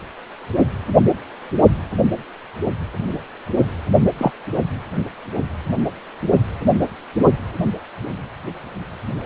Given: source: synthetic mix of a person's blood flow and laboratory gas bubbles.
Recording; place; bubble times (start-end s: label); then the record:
Doppler ultrasound of blood flow; precordium
4.18-4.31 s: bubbles
From the record:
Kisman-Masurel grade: 113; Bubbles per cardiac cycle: 1 to 2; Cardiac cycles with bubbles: 1 to 10%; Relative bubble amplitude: loud (0.450 to 0.775); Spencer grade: 1 (occasional bubble signal discernible with the cardiac motion signal, with majority of cardiac periods free of bubbles); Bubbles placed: only in the low amplitude regions of the cardiac cycle